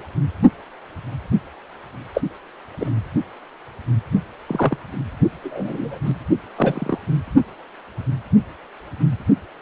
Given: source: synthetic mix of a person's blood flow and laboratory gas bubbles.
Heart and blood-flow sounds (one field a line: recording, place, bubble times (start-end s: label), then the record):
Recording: Doppler ultrasound of blood flow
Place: precordium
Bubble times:
2.14-2.22 s: bubbles
2.80-2.90 s: bubbles
4.47-4.77 s: bubbles
5.43-5.98 s: bubbles
6.05-6.11 s: bubbles
6.55-6.99 s: bubbles
From the record:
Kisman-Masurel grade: 123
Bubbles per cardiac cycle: 1 to 2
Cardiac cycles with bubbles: 10 to 50%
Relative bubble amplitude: loud (0.450 to 0.775)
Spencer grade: 2 (many but less than half of the cardiac periods contain bubble signals, singularly or in groups)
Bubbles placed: anywhere in the cardiac cycle